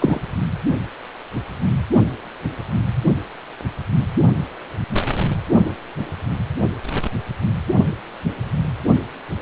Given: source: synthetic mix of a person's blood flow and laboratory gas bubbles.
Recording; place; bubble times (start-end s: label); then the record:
Doppler ultrasound of blood flow; precordium
0.00-0.20 s: bubbles
From the record:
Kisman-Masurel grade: 113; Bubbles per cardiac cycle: 1 to 2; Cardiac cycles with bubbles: 1 to 10%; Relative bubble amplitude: loud (0.450 to 0.775); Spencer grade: 1 (occasional bubble signal discernible with the cardiac motion signal, with majority of cardiac periods free of bubbles); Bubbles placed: only in the low amplitude regions of the cardiac cycle